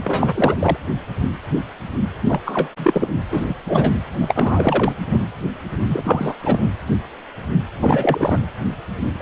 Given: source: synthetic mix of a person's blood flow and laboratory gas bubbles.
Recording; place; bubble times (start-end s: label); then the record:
Doppler ultrasound of blood flow; precordium
0.03-0.77 s: bubbles
2.27-2.40 s: bubbles
2.46-2.69 s: bubbles
2.77-3.09 s: bubbles
3.31-3.54 s: bubbles
3.65-3.99 s: bubbles
4.19-4.93 s: bubbles
5.10-5.21 s: bubbles
5.88-6.33 s: bubbles
6.42-6.70 s: bubbles
7.79-8.38 s: bubbles
9.19-9.22 s: bubbles
From the record:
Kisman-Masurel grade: 333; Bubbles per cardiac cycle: rolling drumbeat, 9 or more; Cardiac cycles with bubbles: 50 to 99%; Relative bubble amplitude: loud (0.450 to 0.775); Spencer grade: 3 (all of the cardiac periods contain showers or single bubble signals, but not dominating or overriding the cardiac motion signals); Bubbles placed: anywhere in the cardiac cycle